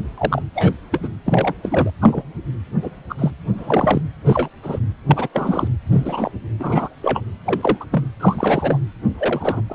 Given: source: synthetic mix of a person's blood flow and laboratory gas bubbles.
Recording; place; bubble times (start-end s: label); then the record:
Doppler ultrasound of blood flow; precordium
0.17-0.42 s: bubbles
0.54-0.74 s: bubbles
0.91-1.08 s: bubbles
1.26-1.54 s: bubbles
1.62-1.90 s: bubbles
2.01-2.23 s: bubbles
2.82-2.90 s: bubbles
3.10-3.15 s: bubbles
3.19-3.31 s: bubbles
3.58-4.02 s: bubbles
4.25-4.49 s: bubbles
4.62-4.79 s: bubbles
5.08-5.28 s: bubbles
5.33-5.67 s: bubbles
5.92-6.31 s: bubbles
6.59-6.88 s: bubbles
7.01-7.22 s: bubbles
7.45-7.85 s: bubbles
7.91-8.05 s: bubbles
8.20-8.79 s: bubbles
9.18-9.62 s: bubbles
9.70-9.75 s: bubbles
From the record:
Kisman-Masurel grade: 243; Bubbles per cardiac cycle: several, 3 to 8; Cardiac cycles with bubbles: 100%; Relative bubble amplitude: loud (0.450 to 0.775); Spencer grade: 3 (all of the cardiac periods contain showers or single bubble signals, but not dominating or overriding the cardiac motion signals); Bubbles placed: anywhere in the cardiac cycle